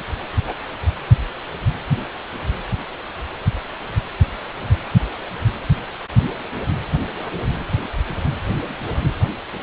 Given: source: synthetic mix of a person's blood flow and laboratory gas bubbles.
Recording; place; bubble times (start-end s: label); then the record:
Doppler ultrasound of blood flow; precordium
0.47-0.54 s: bubbles
From the record:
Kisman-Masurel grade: 111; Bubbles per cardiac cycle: 1 to 2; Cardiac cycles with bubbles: 1 to 10%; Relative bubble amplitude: barely perceptible (0.100 to 0.250); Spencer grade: 1 (occasional bubble signal discernible with the cardiac motion signal, with majority of cardiac periods free of bubbles); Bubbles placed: anywhere in the cardiac cycle